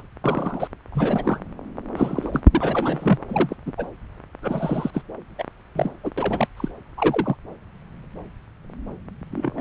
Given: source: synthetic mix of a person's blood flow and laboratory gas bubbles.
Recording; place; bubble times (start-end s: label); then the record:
Doppler ultrasound of blood flow; subclavian vein
0.00-0.02 s: bubbles
0.24-0.67 s: bubbles
0.92-1.40 s: bubbles
1.96-2.40 s: bubbles
2.51-3.19 s: bubbles
3.29-3.55 s: bubbles
3.66-3.73 s: bubbles
3.77-3.86 s: bubbles
4.42-4.91 s: bubbles
4.94-5.02 s: bubbles
5.38-5.44 s: bubbles
5.75-5.93 s: bubbles
6.04-6.11 s: bubbles
6.17-6.48 s: bubbles
6.57-6.69 s: bubbles
6.97-7.36 s: bubbles
9.31-9.61 s: bubbles
From the record:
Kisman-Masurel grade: 232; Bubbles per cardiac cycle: several, 3 to 8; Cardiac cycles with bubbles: 50 to 99%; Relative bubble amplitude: moderate (0.250 to 0.450); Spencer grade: 3 (all of the cardiac periods contain showers or single bubble signals, but not dominating or overriding the cardiac motion signals); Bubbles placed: anywhere in the cardiac cycle